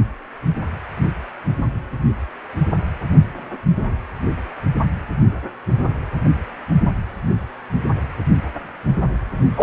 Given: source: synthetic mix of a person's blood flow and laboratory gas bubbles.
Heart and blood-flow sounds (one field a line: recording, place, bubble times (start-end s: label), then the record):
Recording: Doppler ultrasound of blood flow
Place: precordium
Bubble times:
9.55-9.63 s: bubbles
From the record:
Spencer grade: 2 (many but less than half of the cardiac periods contain bubble signals, singularly or in groups)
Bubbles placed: only in the low amplitude regions of the cardiac cycle